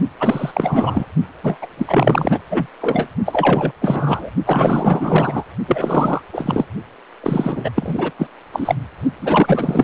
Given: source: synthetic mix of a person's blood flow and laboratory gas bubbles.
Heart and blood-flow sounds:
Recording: Doppler ultrasound of blood flow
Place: precordium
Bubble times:
0.20-1.06 s: bubbles
1.43-1.57 s: bubbles
1.61-1.67 s: bubbles
1.77-2.40 s: bubbles
2.50-2.67 s: bubbles
2.81-3.07 s: bubbles
3.25-3.72 s: bubbles
3.81-4.31 s: bubbles
4.46-5.44 s: bubbles
5.68-6.22 s: bubbles
6.33-6.66 s: bubbles
7.23-7.71 s: bubbles
7.76-8.11 s: bubbles
8.18-8.27 s: bubbles
8.53-8.75 s: bubbles
9.21-9.84 s: bubbles
From the record:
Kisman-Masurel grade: 444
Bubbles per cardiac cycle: continuous sound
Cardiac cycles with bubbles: 100%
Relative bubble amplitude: maximal (0.775 to 0.999)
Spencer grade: 4 (maximum detectable bubble signal sounding continuously throughout systole and diastole of every cardiac period, and overriding the amplitude of the normal cardiac signals)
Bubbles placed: only in the low amplitude regions of the cardiac cycle

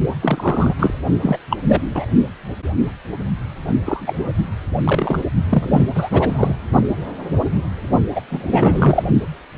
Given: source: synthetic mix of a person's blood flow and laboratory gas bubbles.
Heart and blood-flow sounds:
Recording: Doppler ultrasound of blood flow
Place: precordium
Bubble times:
0.22-0.74 s: bubbles
0.79-0.94 s: bubbles
1.22-1.37 s: bubbles
1.51-1.56 s: bubbles
1.68-1.82 s: bubbles
1.94-2.05 s: bubbles
3.85-4.32 s: bubbles
4.84-5.19 s: bubbles
5.49-5.87 s: bubbles
5.94-6.54 s: bubbles
8.15-8.21 s: bubbles
8.29-9.03 s: bubbles
From the record:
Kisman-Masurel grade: 233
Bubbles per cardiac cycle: several, 3 to 8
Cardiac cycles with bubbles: 50 to 99%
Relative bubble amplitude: loud (0.450 to 0.775)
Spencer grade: 3 (all of the cardiac periods contain showers or single bubble signals, but not dominating or overriding the cardiac motion signals)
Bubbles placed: only in the low amplitude regions of the cardiac cycle

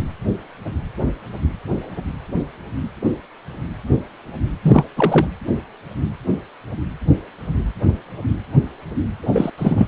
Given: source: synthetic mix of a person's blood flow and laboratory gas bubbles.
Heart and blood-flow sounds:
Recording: Doppler ultrasound of blood flow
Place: precordium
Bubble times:
0.00-0.02 s: bubbles
4.62-4.85 s: bubbles
4.97-5.27 s: bubbles
9.22-9.51 s: bubbles
9.58-9.87 s: bubbles
From the record:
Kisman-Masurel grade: 223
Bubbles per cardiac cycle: several, 3 to 8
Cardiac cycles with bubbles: 10 to 50%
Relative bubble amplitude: loud (0.450 to 0.775)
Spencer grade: 2 (many but less than half of the cardiac periods contain bubble signals, singularly or in groups)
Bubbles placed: anywhere in the cardiac cycle

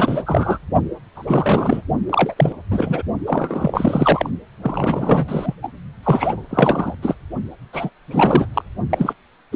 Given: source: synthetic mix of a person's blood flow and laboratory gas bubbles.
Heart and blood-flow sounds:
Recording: Doppler ultrasound of blood flow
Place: precordium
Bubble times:
0.00-0.23 s: bubbles
0.26-0.58 s: bubbles
1.15-1.81 s: bubbles
2.10-2.53 s: bubbles
2.71-3.02 s: bubbles
3.27-4.29 s: bubbles
4.62-5.55 s: bubbles
5.62-5.68 s: bubbles
6.04-6.44 s: bubbles
6.49-6.95 s: bubbles
7.02-7.14 s: bubbles
7.73-7.90 s: bubbles
8.10-8.46 s: bubbles
8.54-8.62 s: bubbles
8.89-9.13 s: bubbles
9.52-9.56 s: bubbles
From the record:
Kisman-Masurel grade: 343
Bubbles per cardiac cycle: rolling drumbeat, 9 or more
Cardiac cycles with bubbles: 100%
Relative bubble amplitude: loud (0.450 to 0.775)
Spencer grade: 3 (all of the cardiac periods contain showers or single bubble signals, but not dominating or overriding the cardiac motion signals)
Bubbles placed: only in the low amplitude regions of the cardiac cycle

